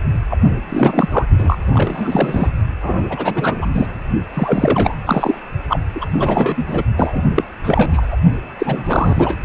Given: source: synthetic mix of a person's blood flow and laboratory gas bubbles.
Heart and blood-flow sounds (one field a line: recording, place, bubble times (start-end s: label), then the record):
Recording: Doppler ultrasound of blood flow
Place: precordium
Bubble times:
0.30-0.37 s: bubbles
0.69-1.25 s: bubbles
1.39-1.57 s: bubbles
1.73-2.50 s: bubbles
2.82-4.03 s: bubbles
4.34-4.95 s: bubbles
5.05-5.39 s: bubbles
5.68-5.79 s: bubbles
5.94-6.05 s: bubbles
6.13-6.83 s: bubbles
6.97-7.25 s: bubbles
7.35-7.44 s: bubbles
7.64-8.17 s: bubbles
8.58-9.37 s: bubbles
From the record:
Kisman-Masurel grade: 343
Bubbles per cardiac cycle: rolling drumbeat, 9 or more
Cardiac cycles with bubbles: 100%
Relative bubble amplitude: loud (0.450 to 0.775)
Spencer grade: 3 (all of the cardiac periods contain showers or single bubble signals, but not dominating or overriding the cardiac motion signals)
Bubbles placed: only in the low amplitude regions of the cardiac cycle